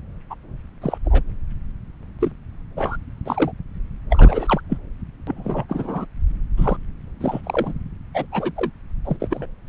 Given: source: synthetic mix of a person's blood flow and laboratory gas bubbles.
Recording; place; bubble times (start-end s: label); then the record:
Doppler ultrasound of blood flow; subclavian vein
0.30-0.35 s: bubbles
0.81-0.98 s: bubbles
1.04-1.23 s: bubbles
2.21-2.31 s: bubbles
2.77-2.97 s: bubbles
3.26-3.52 s: bubbles
4.09-4.60 s: bubbles
4.69-4.77 s: bubbles
5.27-5.65 s: bubbles
5.68-6.05 s: bubbles
6.57-6.76 s: bubbles
7.21-7.41 s: bubbles
7.43-7.73 s: bubbles
8.13-8.25 s: bubbles
8.31-8.52 s: bubbles
8.56-8.71 s: bubbles
9.04-9.16 s: bubbles
9.20-9.46 s: bubbles
From the record:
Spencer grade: 3 (all of the cardiac periods contain showers or single bubble signals, but not dominating or overriding the cardiac motion signals); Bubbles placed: anywhere in the cardiac cycle